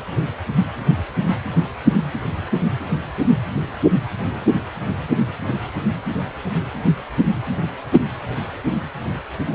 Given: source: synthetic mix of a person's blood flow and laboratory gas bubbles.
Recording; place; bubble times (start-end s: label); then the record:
Doppler ultrasound of blood flow; precordium
9.50-9.55 s: bubbles
From the record:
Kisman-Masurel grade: 121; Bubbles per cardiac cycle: 1 to 2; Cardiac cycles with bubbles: 10 to 50%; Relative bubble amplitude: barely perceptible (0.100 to 0.250); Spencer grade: 2 (many but less than half of the cardiac periods contain bubble signals, singularly or in groups); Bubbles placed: anywhere in the cardiac cycle